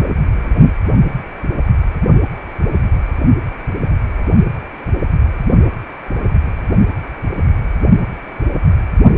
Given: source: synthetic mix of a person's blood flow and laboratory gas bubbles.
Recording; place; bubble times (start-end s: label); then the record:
Doppler ultrasound of blood flow; precordium
0.02-0.11 s: bubbles
0.37-0.56 s: bubbles
From the record:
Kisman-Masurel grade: 111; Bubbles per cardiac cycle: 1 to 2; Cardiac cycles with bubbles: 1 to 10%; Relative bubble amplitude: barely perceptible (0.100 to 0.250); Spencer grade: 1 (occasional bubble signal discernible with the cardiac motion signal, with majority of cardiac periods free of bubbles); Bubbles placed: only in the low amplitude regions of the cardiac cycle